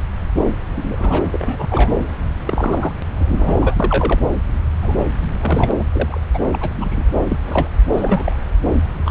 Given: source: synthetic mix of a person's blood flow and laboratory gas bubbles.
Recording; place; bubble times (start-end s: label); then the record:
Doppler ultrasound of blood flow; subclavian vein
0.76-1.23 s: bubbles
1.31-1.93 s: bubbles
2.46-2.93 s: bubbles
3.16-3.75 s: bubbles
3.79-4.20 s: bubbles
4.82-4.98 s: bubbles
5.21-5.71 s: bubbles
5.79-5.83 s: bubbles
5.92-6.21 s: bubbles
6.33-6.39 s: bubbles
6.52-6.70 s: bubbles
6.73-7.03 s: bubbles
7.28-7.37 s: bubbles
7.46-7.69 s: bubbles
7.94-8.37 s: bubbles
9.04-9.11 s: bubbles
From the record:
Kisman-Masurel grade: 242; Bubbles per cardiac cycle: several, 3 to 8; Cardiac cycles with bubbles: 100%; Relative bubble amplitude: moderate (0.250 to 0.450); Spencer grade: 3 (all of the cardiac periods contain showers or single bubble signals, but not dominating or overriding the cardiac motion signals); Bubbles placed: anywhere in the cardiac cycle